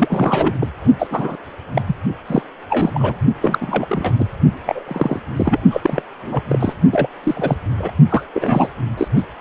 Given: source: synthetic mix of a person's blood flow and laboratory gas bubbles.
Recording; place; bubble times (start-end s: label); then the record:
Doppler ultrasound of blood flow; precordium
0.00-0.54 s: bubbles
0.60-0.68 s: bubbles
0.99-1.07 s: bubbles
1.10-1.37 s: bubbles
1.75-1.81 s: bubbles
1.87-1.96 s: bubbles
2.27-2.42 s: bubbles
2.70-3.17 s: bubbles
3.42-3.86 s: bubbles
3.88-4.15 s: bubbles
4.19-4.25 s: bubbles
4.66-4.83 s: bubbles
4.88-5.20 s: bubbles
5.36-5.59 s: bubbles
5.70-6.02 s: bubbles
6.23-6.74 s: bubbles
6.92-7.07 s: bubbles
7.23-7.57 s: bubbles
7.79-7.91 s: bubbles
8.10-8.22 s: bubbles
8.33-8.68 s: bubbles
8.97-9.08 s: bubbles
9.15-9.24 s: bubbles
From the record:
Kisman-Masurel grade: 243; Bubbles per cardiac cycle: several, 3 to 8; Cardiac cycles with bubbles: 100%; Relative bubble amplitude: loud (0.450 to 0.775); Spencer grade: 3 (all of the cardiac periods contain showers or single bubble signals, but not dominating or overriding the cardiac motion signals); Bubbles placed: only in the low amplitude regions of the cardiac cycle